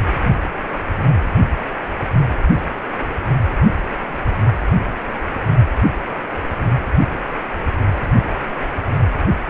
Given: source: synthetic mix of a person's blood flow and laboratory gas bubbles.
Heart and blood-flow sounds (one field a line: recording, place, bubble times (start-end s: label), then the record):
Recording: Doppler ultrasound of blood flow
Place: precordium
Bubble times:
no bubbles
From the record:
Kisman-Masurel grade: 000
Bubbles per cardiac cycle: 0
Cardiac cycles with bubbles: 0%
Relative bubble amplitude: no bubbles discernible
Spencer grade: 0 (complete lack of bubble signals)